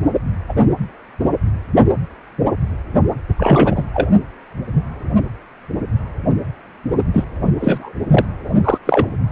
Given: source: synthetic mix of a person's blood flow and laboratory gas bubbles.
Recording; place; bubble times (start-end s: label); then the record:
Doppler ultrasound of blood flow; precordium
0.48-0.53 s: bubbles
3.37-3.83 s: bubbles
3.94-4.08 s: bubbles
7.13-7.25 s: bubbles
7.59-7.92 s: bubbles
8.11-8.25 s: bubbles
8.64-8.78 s: bubbles
8.85-9.07 s: bubbles
From the record:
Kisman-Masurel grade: 233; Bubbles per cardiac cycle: several, 3 to 8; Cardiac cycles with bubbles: 50 to 99%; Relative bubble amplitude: loud (0.450 to 0.775); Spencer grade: 3 (all of the cardiac periods contain showers or single bubble signals, but not dominating or overriding the cardiac motion signals); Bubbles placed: only in the low amplitude regions of the cardiac cycle